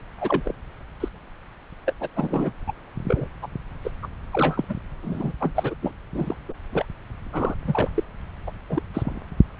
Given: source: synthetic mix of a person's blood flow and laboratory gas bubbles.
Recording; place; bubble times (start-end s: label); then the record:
Doppler ultrasound of blood flow; subclavian vein
0.18-0.54 s: bubbles
1.00-1.08 s: bubbles
1.86-1.94 s: bubbles
2.00-2.08 s: bubbles
2.15-2.51 s: bubbles
2.67-2.73 s: bubbles
3.07-3.27 s: bubbles
3.42-3.46 s: bubbles
3.83-3.91 s: bubbles
4.02-4.08 s: bubbles
4.31-4.65 s: bubbles
4.68-4.75 s: bubbles
5.02-5.32 s: bubbles
5.40-5.75 s: bubbles
5.82-5.93 s: bubbles
6.14-6.36 s: bubbles
6.49-6.54 s: bubbles
6.73-6.85 s: bubbles
7.32-7.55 s: bubbles
7.67-7.89 s: bubbles
7.94-8.04 s: bubbles
8.47-8.51 s: bubbles
8.69-8.83 s: bubbles
8.94-9.20 s: bubbles
From the record:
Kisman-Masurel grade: 242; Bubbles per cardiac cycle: several, 3 to 8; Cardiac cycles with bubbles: 100%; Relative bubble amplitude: moderate (0.250 to 0.450); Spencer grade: 3 (all of the cardiac periods contain showers or single bubble signals, but not dominating or overriding the cardiac motion signals); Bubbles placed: anywhere in the cardiac cycle